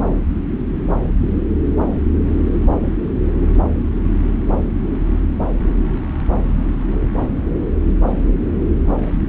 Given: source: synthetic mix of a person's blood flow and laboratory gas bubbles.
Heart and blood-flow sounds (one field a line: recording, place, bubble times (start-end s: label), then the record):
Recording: Doppler ultrasound of blood flow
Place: subclavian vein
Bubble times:
0.07-0.19 s: bubbles
From the record:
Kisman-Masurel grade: 121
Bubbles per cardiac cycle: 1 to 2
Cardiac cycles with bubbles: 10 to 50%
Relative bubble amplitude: barely perceptible (0.100 to 0.250)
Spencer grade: 2 (many but less than half of the cardiac periods contain bubble signals, singularly or in groups)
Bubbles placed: anywhere in the cardiac cycle